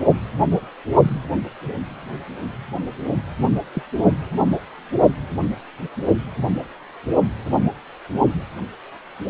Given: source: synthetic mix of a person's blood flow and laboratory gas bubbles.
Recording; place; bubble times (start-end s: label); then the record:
Doppler ultrasound of blood flow; precordium
3.73-3.82 s: bubbles
From the record:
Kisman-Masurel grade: 111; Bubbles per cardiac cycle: 1 to 2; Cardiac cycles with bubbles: 1 to 10%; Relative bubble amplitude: barely perceptible (0.100 to 0.250); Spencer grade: 1 (occasional bubble signal discernible with the cardiac motion signal, with majority of cardiac periods free of bubbles); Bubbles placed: only in the low amplitude regions of the cardiac cycle